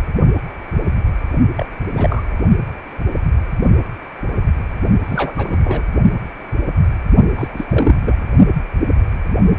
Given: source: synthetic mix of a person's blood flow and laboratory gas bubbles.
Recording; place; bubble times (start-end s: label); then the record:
Doppler ultrasound of blood flow; precordium
1.55-1.66 s: bubbles
1.96-2.23 s: bubbles
5.05-5.83 s: bubbles
7.36-7.48 s: bubbles
7.54-7.65 s: bubbles
7.71-7.96 s: bubbles
8.02-8.24 s: bubbles
From the record:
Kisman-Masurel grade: 222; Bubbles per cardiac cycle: several, 3 to 8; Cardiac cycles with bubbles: 10 to 50%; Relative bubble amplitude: moderate (0.250 to 0.450); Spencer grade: 2 (many but less than half of the cardiac periods contain bubble signals, singularly or in groups); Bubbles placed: only in the low amplitude regions of the cardiac cycle